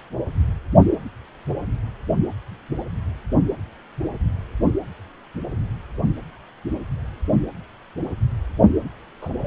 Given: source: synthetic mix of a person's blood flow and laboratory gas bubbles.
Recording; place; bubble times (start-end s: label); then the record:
Doppler ultrasound of blood flow; precordium
9.21-9.30 s: bubbles
9.39-9.47 s: bubbles
From the record:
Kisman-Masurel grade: 111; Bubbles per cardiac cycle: 1 to 2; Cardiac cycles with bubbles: 1 to 10%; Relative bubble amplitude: barely perceptible (0.100 to 0.250); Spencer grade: 1 (occasional bubble signal discernible with the cardiac motion signal, with majority of cardiac periods free of bubbles); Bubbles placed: only in the low amplitude regions of the cardiac cycle